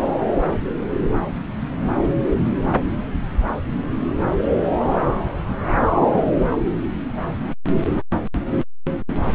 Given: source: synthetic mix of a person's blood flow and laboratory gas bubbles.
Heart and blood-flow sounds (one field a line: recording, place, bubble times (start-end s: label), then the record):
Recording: Doppler ultrasound of blood flow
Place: subclavian vein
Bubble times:
5.78-6.33 s: bubbles
6.37-6.44 s: bubbles
6.50-6.58 s: bubbles
From the record:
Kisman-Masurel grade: 211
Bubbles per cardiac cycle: several, 3 to 8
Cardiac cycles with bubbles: 1 to 10%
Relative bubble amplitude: barely perceptible (0.100 to 0.250)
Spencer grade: 1 (occasional bubble signal discernible with the cardiac motion signal, with majority of cardiac periods free of bubbles)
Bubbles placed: anywhere in the cardiac cycle